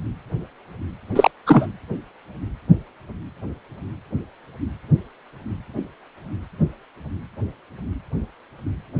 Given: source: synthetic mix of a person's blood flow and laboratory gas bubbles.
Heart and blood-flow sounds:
Doppler ultrasound of blood flow; precordium
1.15-1.31 s: bubbles
1.46-1.67 s: bubbles
From the record:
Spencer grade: 1 (occasional bubble signal discernible with the cardiac motion signal, with majority of cardiac periods free of bubbles); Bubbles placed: anywhere in the cardiac cycle

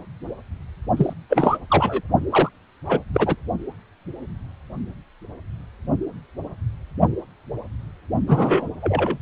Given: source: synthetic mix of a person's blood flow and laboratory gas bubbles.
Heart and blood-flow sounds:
Doppler ultrasound of blood flow; precordium
0.97-1.13 s: bubbles
1.30-1.57 s: bubbles
1.69-2.01 s: bubbles
2.30-2.49 s: bubbles
2.86-3.00 s: bubbles
3.14-3.36 s: bubbles
8.27-8.68 s: bubbles
8.81-9.18 s: bubbles
From the record:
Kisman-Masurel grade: 223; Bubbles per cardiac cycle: several, 3 to 8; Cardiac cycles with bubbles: 10 to 50%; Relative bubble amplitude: loud (0.450 to 0.775); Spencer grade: 2 (many but less than half of the cardiac periods contain bubble signals, singularly or in groups); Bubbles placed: only in the low amplitude regions of the cardiac cycle

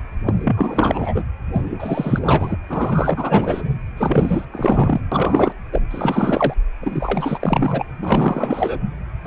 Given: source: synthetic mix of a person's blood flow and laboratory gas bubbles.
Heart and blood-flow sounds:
Doppler ultrasound of blood flow; precordium
0.26-1.25 s: bubbles
1.52-1.61 s: bubbles
1.64-2.56 s: bubbles
2.69-3.79 s: bubbles
3.97-4.45 s: bubbles
4.52-5.00 s: bubbles
5.12-5.53 s: bubbles
5.72-5.81 s: bubbles
5.91-6.54 s: bubbles
6.80-7.86 s: bubbles
8.03-8.79 s: bubbles
9.24-9.26 s: bubbles
From the record:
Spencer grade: 4 (maximum detectable bubble signal sounding continuously throughout systole and diastole of every cardiac period, and overriding the amplitude of the normal cardiac signals); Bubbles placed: anywhere in the cardiac cycle

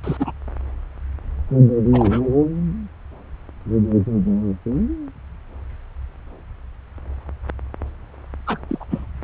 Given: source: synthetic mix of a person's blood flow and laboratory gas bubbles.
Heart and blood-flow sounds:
Doppler ultrasound of blood flow; subclavian vein
0.04-0.33 s: bubbles
1.93-2.27 s: bubbles
8.46-8.59 s: bubbles
8.69-8.85 s: bubbles
8.91-9.07 s: bubbles
From the record:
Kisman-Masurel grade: 222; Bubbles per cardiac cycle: several, 3 to 8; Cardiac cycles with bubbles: 10 to 50%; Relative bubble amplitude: moderate (0.250 to 0.450); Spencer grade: 2 (many but less than half of the cardiac periods contain bubble signals, singularly or in groups); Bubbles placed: anywhere in the cardiac cycle

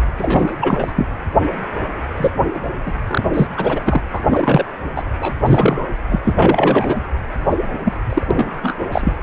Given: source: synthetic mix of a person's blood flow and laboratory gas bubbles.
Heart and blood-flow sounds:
Doppler ultrasound of blood flow; precordium
0.18-0.56 s: bubbles
0.60-0.93 s: bubbles
0.95-1.06 s: bubbles
2.17-2.31 s: bubbles
2.54-2.59 s: bubbles
2.86-2.93 s: bubbles
3.07-3.23 s: bubbles
3.33-3.47 s: bubbles
3.56-4.01 s: bubbles
4.13-4.21 s: bubbles
4.27-4.64 s: bubbles
4.96-5.02 s: bubbles
5.21-5.33 s: bubbles
5.45-5.88 s: bubbles
6.09-6.19 s: bubbles
6.25-7.00 s: bubbles
7.49-7.56 s: bubbles
7.84-7.93 s: bubbles
8.09-8.26 s: bubbles
8.30-8.76 s: bubbles
8.91-9.12 s: bubbles
From the record:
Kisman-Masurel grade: 243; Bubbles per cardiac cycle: several, 3 to 8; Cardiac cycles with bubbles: 100%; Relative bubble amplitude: loud (0.450 to 0.775); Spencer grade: 3 (all of the cardiac periods contain showers or single bubble signals, but not dominating or overriding the cardiac motion signals); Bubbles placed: anywhere in the cardiac cycle

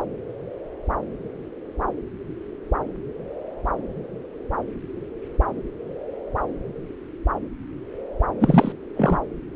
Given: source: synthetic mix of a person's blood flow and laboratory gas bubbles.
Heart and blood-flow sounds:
Doppler ultrasound of blood flow; subclavian vein
8.40-8.72 s: bubbles
8.96-9.19 s: bubbles
From the record:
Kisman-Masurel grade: 213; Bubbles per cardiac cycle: several, 3 to 8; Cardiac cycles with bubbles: 1 to 10%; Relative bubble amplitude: loud (0.450 to 0.775); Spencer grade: 1 (occasional bubble signal discernible with the cardiac motion signal, with majority of cardiac periods free of bubbles); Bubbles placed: anywhere in the cardiac cycle

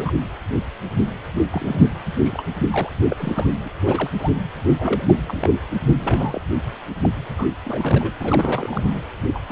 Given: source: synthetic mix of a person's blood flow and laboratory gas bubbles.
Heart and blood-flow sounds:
Doppler ultrasound of blood flow; precordium
0.00-0.12 s: bubbles
1.51-1.88 s: bubbles
2.05-2.13 s: bubbles
2.15-2.44 s: bubbles
2.71-2.90 s: bubbles
3.10-3.46 s: bubbles
3.62-3.69 s: bubbles
3.86-4.10 s: bubbles
4.18-4.30 s: bubbles
4.77-5.03 s: bubbles
5.07-5.18 s: bubbles
5.26-5.52 s: bubbles
5.88-6.41 s: bubbles
7.02-7.09 s: bubbles
7.38-7.46 s: bubbles
7.63-8.12 s: bubbles
8.17-9.00 s: bubbles
9.34-9.40 s: bubbles
9.46-9.52 s: bubbles
From the record:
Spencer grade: 3 (all of the cardiac periods contain showers or single bubble signals, but not dominating or overriding the cardiac motion signals); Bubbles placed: anywhere in the cardiac cycle

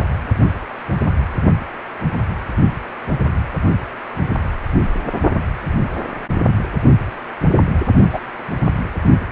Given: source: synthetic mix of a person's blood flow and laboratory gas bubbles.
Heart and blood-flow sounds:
Doppler ultrasound of blood flow; precordium
8.12-8.20 s: bubbles
From the record:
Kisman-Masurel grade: 122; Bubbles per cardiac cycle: 1 to 2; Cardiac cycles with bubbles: 10 to 50%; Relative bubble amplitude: moderate (0.250 to 0.450); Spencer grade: 2 (many but less than half of the cardiac periods contain bubble signals, singularly or in groups); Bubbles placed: only in the low amplitude regions of the cardiac cycle

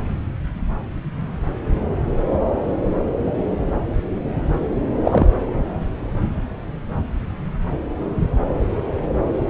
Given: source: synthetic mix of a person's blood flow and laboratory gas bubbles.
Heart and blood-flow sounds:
Doppler ultrasound of blood flow; subclavian vein
5.04-5.30 s: bubbles
From the record:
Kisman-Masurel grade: 113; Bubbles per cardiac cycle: 1 to 2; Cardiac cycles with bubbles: 1 to 10%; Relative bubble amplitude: loud (0.450 to 0.775); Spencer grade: 1 (occasional bubble signal discernible with the cardiac motion signal, with majority of cardiac periods free of bubbles); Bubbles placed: anywhere in the cardiac cycle

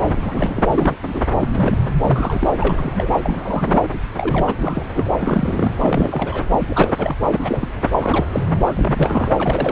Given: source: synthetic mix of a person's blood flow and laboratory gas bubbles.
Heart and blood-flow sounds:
Doppler ultrasound of blood flow; subclavian vein
0.01-0.66 s: bubbles
0.70-0.98 s: bubbles
1.02-1.22 s: bubbles
1.41-1.49 s: bubbles
1.53-1.95 s: bubbles
2.02-2.50 s: bubbles
2.60-3.11 s: bubbles
3.23-3.80 s: bubbles
4.17-4.54 s: bubbles
4.60-4.86 s: bubbles
4.96-5.04 s: bubbles
5.15-5.72 s: bubbles
5.78-6.44 s: bubbles
6.52-6.94 s: bubbles
6.98-7.15 s: bubbles
7.25-7.68 s: bubbles
8.00-8.27 s: bubbles
8.32-8.42 s: bubbles
8.66-9.33 s: bubbles
9.38-9.71 s: bubbles
From the record:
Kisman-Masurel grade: 342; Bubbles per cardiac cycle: rolling drumbeat, 9 or more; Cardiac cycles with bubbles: 100%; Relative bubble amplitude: moderate (0.250 to 0.450); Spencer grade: 3 (all of the cardiac periods contain showers or single bubble signals, but not dominating or overriding the cardiac motion signals); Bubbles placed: anywhere in the cardiac cycle

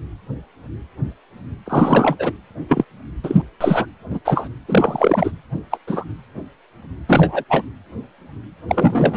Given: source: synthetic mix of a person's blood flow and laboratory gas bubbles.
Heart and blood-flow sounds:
Doppler ultrasound of blood flow; precordium
1.66-2.17 s: bubbles
2.19-2.32 s: bubbles
2.68-2.84 s: bubbles
3.24-3.42 s: bubbles
3.61-3.86 s: bubbles
4.10-4.19 s: bubbles
4.25-4.50 s: bubbles
4.69-5.32 s: bubbles
5.71-5.78 s: bubbles
5.87-6.04 s: bubbles
7.07-7.44 s: bubbles
7.50-7.65 s: bubbles
8.68-9.17 s: bubbles
From the record:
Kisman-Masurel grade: 233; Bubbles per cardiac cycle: several, 3 to 8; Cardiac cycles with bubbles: 50 to 99%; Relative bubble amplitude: loud (0.450 to 0.775); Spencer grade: 3 (all of the cardiac periods contain showers or single bubble signals, but not dominating or overriding the cardiac motion signals); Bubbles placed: anywhere in the cardiac cycle

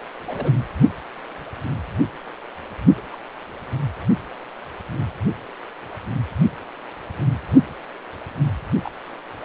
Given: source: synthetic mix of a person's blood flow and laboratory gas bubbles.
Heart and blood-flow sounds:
Doppler ultrasound of blood flow; precordium
0.27-0.53 s: bubbles
2.96-3.01 s: bubbles
3.11-3.16 s: bubbles
8.84-8.92 s: bubbles
From the record:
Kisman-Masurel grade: 121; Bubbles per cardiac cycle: 1 to 2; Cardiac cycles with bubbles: 10 to 50%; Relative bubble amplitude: barely perceptible (0.100 to 0.250); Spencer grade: 2 (many but less than half of the cardiac periods contain bubble signals, singularly or in groups); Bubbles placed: only in the low amplitude regions of the cardiac cycle

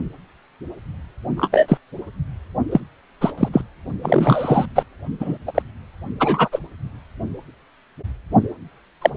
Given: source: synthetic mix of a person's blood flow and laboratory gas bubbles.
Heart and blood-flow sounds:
Doppler ultrasound of blood flow; precordium
1.37-1.78 s: bubbles
2.71-2.80 s: bubbles
3.21-3.33 s: bubbles
3.38-3.48 s: bubbles
3.53-3.62 s: bubbles
4.02-4.66 s: bubbles
4.75-4.83 s: bubbles
5.20-5.38 s: bubbles
5.46-5.51 s: bubbles
5.54-5.62 s: bubbles
6.20-6.48 s: bubbles
6.51-6.59 s: bubbles
9.02-9.10 s: bubbles
From the record:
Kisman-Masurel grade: 233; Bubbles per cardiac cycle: several, 3 to 8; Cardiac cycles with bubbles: 50 to 99%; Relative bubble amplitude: loud (0.450 to 0.775); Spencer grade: 3 (all of the cardiac periods contain showers or single bubble signals, but not dominating or overriding the cardiac motion signals); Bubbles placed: only in the low amplitude regions of the cardiac cycle

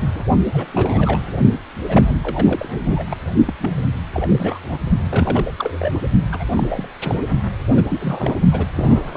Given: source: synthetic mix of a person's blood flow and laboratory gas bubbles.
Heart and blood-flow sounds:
Doppler ultrasound of blood flow; precordium
0.01-0.07 s: bubbles
0.14-0.24 s: bubbles
0.53-0.65 s: bubbles
0.68-1.19 s: bubbles
1.88-2.17 s: bubbles
2.23-3.17 s: bubbles
3.46-3.54 s: bubbles
3.61-3.76 s: bubbles
4.13-4.79 s: bubbles
5.09-5.53 s: bubbles
5.57-5.92 s: bubbles
6.32-6.45 s: bubbles
6.55-6.88 s: bubbles
7.01-7.25 s: bubbles
7.72-7.83 s: bubbles
7.88-8.38 s: bubbles
8.52-8.65 s: bubbles
8.74-9.17 s: bubbles
From the record:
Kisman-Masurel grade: 342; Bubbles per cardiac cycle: rolling drumbeat, 9 or more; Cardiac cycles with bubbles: 100%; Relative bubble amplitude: moderate (0.250 to 0.450); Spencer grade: 3 (all of the cardiac periods contain showers or single bubble signals, but not dominating or overriding the cardiac motion signals); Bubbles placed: only in the low amplitude regions of the cardiac cycle

